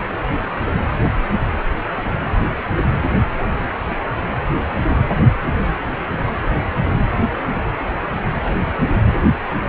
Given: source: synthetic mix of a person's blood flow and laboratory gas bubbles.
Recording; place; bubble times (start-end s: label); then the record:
Doppler ultrasound of blood flow; precordium
8.42-8.62 s: bubbles
8.88-9.08 s: bubbles
From the record:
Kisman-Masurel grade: 121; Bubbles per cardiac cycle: 1 to 2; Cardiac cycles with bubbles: 10 to 50%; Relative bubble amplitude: barely perceptible (0.100 to 0.250); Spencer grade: 2 (many but less than half of the cardiac periods contain bubble signals, singularly or in groups); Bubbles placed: anywhere in the cardiac cycle